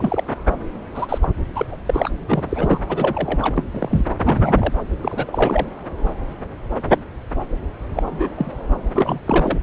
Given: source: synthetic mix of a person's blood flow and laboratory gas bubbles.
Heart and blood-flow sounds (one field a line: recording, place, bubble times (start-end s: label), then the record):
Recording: Doppler ultrasound of blood flow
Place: subclavian vein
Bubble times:
0.00-0.24 s: bubbles
0.94-1.18 s: bubbles
1.21-1.28 s: bubbles
1.55-1.66 s: bubbles
1.71-1.76 s: bubbles
1.86-2.10 s: bubbles
2.28-2.80 s: bubbles
2.89-3.64 s: bubbles
3.74-4.04 s: bubbles
4.25-4.74 s: bubbles
5.00-5.67 s: bubbles
7.95-8.03 s: bubbles
8.06-8.29 s: bubbles
8.35-8.52 s: bubbles
8.96-9.20 s: bubbles
9.26-9.57 s: bubbles
From the record:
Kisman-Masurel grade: 232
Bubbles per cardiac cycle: several, 3 to 8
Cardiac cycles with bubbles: 50 to 99%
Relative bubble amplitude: moderate (0.250 to 0.450)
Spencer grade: 3 (all of the cardiac periods contain showers or single bubble signals, but not dominating or overriding the cardiac motion signals)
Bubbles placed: anywhere in the cardiac cycle